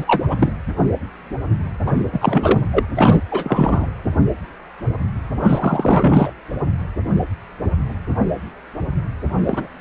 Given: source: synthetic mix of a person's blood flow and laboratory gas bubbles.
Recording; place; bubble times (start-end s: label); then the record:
Doppler ultrasound of blood flow; precordium
0.00-0.52 s: bubbles
1.86-1.92 s: bubbles
2.12-2.59 s: bubbles
2.72-2.84 s: bubbles
2.96-3.23 s: bubbles
3.31-3.86 s: bubbles
5.37-6.31 s: bubbles
9.39-9.67 s: bubbles
From the record:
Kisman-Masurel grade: 333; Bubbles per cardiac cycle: rolling drumbeat, 9 or more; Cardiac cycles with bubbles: 50 to 99%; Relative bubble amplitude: loud (0.450 to 0.775); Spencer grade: 3 (all of the cardiac periods contain showers or single bubble signals, but not dominating or overriding the cardiac motion signals); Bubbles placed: anywhere in the cardiac cycle